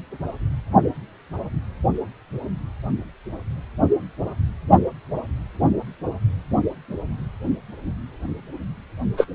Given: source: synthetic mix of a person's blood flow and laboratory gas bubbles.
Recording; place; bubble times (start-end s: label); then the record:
Doppler ultrasound of blood flow; precordium
9.17-9.27 s: bubbles
From the record:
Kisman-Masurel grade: 113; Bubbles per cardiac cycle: 1 to 2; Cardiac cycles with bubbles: 1 to 10%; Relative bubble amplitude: loud (0.450 to 0.775); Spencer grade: 1 (occasional bubble signal discernible with the cardiac motion signal, with majority of cardiac periods free of bubbles); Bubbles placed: only in the low amplitude regions of the cardiac cycle